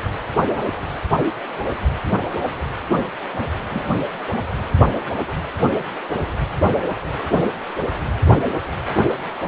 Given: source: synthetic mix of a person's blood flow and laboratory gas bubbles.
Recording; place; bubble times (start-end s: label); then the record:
Doppler ultrasound of blood flow; precordium
3.71-3.81 s: bubbles
From the record:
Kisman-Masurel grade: 112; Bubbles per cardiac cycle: 1 to 2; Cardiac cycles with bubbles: 1 to 10%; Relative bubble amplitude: moderate (0.250 to 0.450); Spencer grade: 1 (occasional bubble signal discernible with the cardiac motion signal, with majority of cardiac periods free of bubbles); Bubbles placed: anywhere in the cardiac cycle